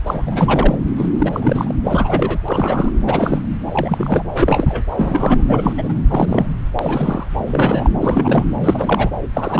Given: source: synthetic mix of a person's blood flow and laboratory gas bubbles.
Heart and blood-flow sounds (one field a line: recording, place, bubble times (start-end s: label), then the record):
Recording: Doppler ultrasound of blood flow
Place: subclavian vein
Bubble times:
0.07-0.76 s: bubbles
0.96-1.06 s: bubbles
1.19-1.73 s: bubbles
1.84-2.39 s: bubbles
2.48-2.91 s: bubbles
3.06-3.40 s: bubbles
3.70-4.24 s: bubbles
4.33-4.84 s: bubbles
4.91-5.44 s: bubbles
5.46-5.73 s: bubbles
5.78-5.94 s: bubbles
6.08-6.48 s: bubbles
6.79-7.26 s: bubbles
7.38-7.90 s: bubbles
8.02-8.44 s: bubbles
8.58-9.10 s: bubbles
9.33-9.60 s: bubbles
From the record:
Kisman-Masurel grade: 343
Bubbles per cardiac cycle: rolling drumbeat, 9 or more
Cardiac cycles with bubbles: 100%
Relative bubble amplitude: loud (0.450 to 0.775)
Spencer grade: 3 (all of the cardiac periods contain showers or single bubble signals, but not dominating or overriding the cardiac motion signals)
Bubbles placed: anywhere in the cardiac cycle